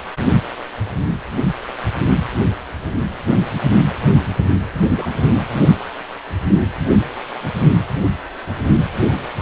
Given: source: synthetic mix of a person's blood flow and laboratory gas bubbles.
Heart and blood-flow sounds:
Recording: Doppler ultrasound of blood flow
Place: precordium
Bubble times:
4.73-4.91 s: bubbles
4.96-5.46 s: bubbles
From the record:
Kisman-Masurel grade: 221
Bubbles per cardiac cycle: several, 3 to 8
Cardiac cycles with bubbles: 10 to 50%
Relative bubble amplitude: barely perceptible (0.100 to 0.250)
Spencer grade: 2 (many but less than half of the cardiac periods contain bubble signals, singularly or in groups)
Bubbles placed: only in the low amplitude regions of the cardiac cycle

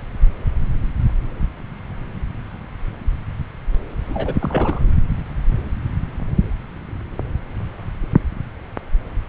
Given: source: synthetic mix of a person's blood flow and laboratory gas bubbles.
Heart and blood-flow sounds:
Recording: Doppler ultrasound of blood flow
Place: subclavian vein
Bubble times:
4.07-4.81 s: bubbles
From the record:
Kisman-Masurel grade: 212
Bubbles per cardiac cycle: several, 3 to 8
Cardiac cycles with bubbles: 1 to 10%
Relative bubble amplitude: moderate (0.250 to 0.450)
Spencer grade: 1 (occasional bubble signal discernible with the cardiac motion signal, with majority of cardiac periods free of bubbles)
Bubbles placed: anywhere in the cardiac cycle

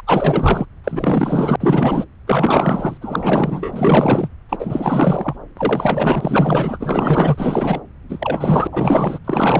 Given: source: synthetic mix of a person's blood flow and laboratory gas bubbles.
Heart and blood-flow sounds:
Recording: Doppler ultrasound of blood flow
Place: subclavian vein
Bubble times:
0.07-0.65 s: bubbles
0.84-1.56 s: bubbles
1.60-2.04 s: bubbles
2.27-2.98 s: bubbles
3.01-4.28 s: bubbles
4.49-5.36 s: bubbles
5.57-7.81 s: bubbles
8.09-8.67 s: bubbles
8.72-9.19 s: bubbles
9.24-9.59 s: bubbles
From the record:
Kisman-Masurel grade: 444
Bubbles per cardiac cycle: continuous sound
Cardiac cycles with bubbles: 100%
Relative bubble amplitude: maximal (0.775 to 0.999)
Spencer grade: 4 (maximum detectable bubble signal sounding continuously throughout systole and diastole of every cardiac period, and overriding the amplitude of the normal cardiac signals)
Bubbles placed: anywhere in the cardiac cycle

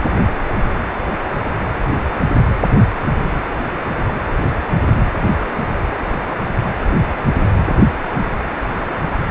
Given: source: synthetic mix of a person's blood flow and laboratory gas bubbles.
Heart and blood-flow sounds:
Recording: Doppler ultrasound of blood flow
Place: precordium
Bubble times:
no bubbles
From the record:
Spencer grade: 0 (complete lack of bubble signals)

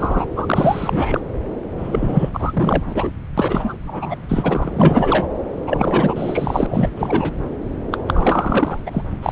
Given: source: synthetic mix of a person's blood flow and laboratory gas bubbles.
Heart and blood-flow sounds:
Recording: Doppler ultrasound of blood flow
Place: subclavian vein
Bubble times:
0.00-0.26 s: bubbles
0.35-1.20 s: bubbles
1.77-2.30 s: bubbles
2.33-3.11 s: bubbles
3.38-3.79 s: bubbles
3.86-4.17 s: bubbles
4.29-5.28 s: bubbles
5.61-6.89 s: bubbles
6.96-7.34 s: bubbles
7.91-7.97 s: bubbles
8.05-8.81 s: bubbles
8.86-9.03 s: bubbles
9.22-9.32 s: bubbles
From the record:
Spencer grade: 4 (maximum detectable bubble signal sounding continuously throughout systole and diastole of every cardiac period, and overriding the amplitude of the normal cardiac signals)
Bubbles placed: anywhere in the cardiac cycle

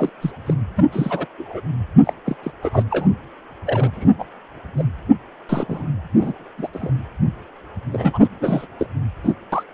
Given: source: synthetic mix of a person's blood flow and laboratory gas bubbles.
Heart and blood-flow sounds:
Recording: Doppler ultrasound of blood flow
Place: precordium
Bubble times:
0.00-0.10 s: bubbles
0.22-0.32 s: bubbles
0.46-0.54 s: bubbles
0.76-0.85 s: bubbles
0.92-1.26 s: bubbles
1.39-1.60 s: bubbles
2.04-2.13 s: bubbles
2.25-2.36 s: bubbles
2.43-2.52 s: bubbles
2.61-2.71 s: bubbles
2.73-2.84 s: bubbles
2.90-3.07 s: bubbles
3.66-4.13 s: bubbles
4.19-4.25 s: bubbles
4.77-4.85 s: bubbles
5.49-5.83 s: bubbles
6.16-6.45 s: bubbles
6.57-6.68 s: bubbles
6.73-6.91 s: bubbles
7.93-8.28 s: bubbles
8.40-8.66 s: bubbles
8.79-8.86 s: bubbles
9.23-9.33 s: bubbles
9.52-9.63 s: bubbles
From the record:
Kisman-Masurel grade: 232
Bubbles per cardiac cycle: several, 3 to 8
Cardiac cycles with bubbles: 50 to 99%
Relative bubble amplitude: moderate (0.250 to 0.450)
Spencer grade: 3 (all of the cardiac periods contain showers or single bubble signals, but not dominating or overriding the cardiac motion signals)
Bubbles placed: anywhere in the cardiac cycle

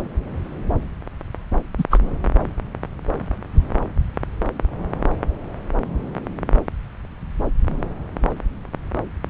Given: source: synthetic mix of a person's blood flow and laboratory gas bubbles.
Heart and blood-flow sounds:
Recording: Doppler ultrasound of blood flow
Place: subclavian vein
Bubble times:
1.77-1.83 s: bubbles
1.90-1.98 s: bubbles
From the record:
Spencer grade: 1 (occasional bubble signal discernible with the cardiac motion signal, with majority of cardiac periods free of bubbles)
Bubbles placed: anywhere in the cardiac cycle

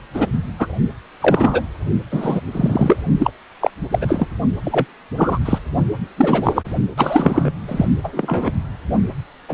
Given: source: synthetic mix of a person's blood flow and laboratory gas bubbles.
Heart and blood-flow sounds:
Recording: Doppler ultrasound of blood flow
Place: precordium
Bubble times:
0.14-0.29 s: bubbles
0.59-0.67 s: bubbles
1.20-1.61 s: bubbles
2.11-2.40 s: bubbles
2.52-2.98 s: bubbles
3.17-3.30 s: bubbles
3.61-3.71 s: bubbles
3.90-4.26 s: bubbles
4.64-4.85 s: bubbles
5.17-5.39 s: bubbles
5.45-5.58 s: bubbles
6.17-6.62 s: bubbles
6.97-7.51 s: bubbles
7.68-7.85 s: bubbles
8.04-8.51 s: bubbles
9.48-9.54 s: bubbles
From the record:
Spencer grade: 3 (all of the cardiac periods contain showers or single bubble signals, but not dominating or overriding the cardiac motion signals)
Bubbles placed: only in the low amplitude regions of the cardiac cycle

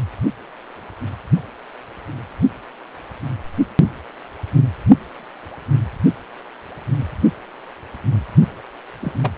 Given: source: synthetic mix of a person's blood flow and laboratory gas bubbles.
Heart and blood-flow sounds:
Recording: Doppler ultrasound of blood flow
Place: precordium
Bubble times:
9.01-9.12 s: bubbles
9.21-9.31 s: bubbles
From the record:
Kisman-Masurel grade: 211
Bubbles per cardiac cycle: several, 3 to 8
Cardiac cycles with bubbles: 1 to 10%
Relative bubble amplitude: barely perceptible (0.100 to 0.250)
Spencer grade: 1 (occasional bubble signal discernible with the cardiac motion signal, with majority of cardiac periods free of bubbles)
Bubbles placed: only in the low amplitude regions of the cardiac cycle

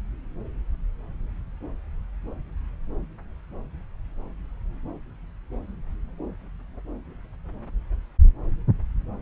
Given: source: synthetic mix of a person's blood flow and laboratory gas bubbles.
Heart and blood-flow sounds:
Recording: Doppler ultrasound of blood flow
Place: subclavian vein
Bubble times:
no bubbles
From the record:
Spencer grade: 0 (complete lack of bubble signals)

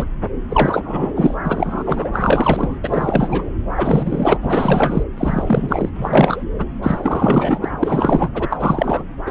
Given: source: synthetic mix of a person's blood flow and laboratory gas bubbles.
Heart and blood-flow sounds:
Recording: Doppler ultrasound of blood flow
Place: subclavian vein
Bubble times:
0.00-0.06 s: bubbles
0.48-1.34 s: bubbles
1.44-2.08 s: bubbles
2.13-2.76 s: bubbles
2.83-3.50 s: bubbles
3.73-4.38 s: bubbles
4.42-5.04 s: bubbles
5.17-5.89 s: bubbles
5.95-6.44 s: bubbles
6.58-6.65 s: bubbles
6.83-7.59 s: bubbles
7.62-7.70 s: bubbles
7.80-8.29 s: bubbles
8.34-8.57 s: bubbles
8.60-9.03 s: bubbles
9.26-9.31 s: bubbles
From the record:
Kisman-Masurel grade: 343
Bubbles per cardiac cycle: rolling drumbeat, 9 or more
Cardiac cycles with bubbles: 100%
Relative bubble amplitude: loud (0.450 to 0.775)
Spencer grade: 3 (all of the cardiac periods contain showers or single bubble signals, but not dominating or overriding the cardiac motion signals)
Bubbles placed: anywhere in the cardiac cycle

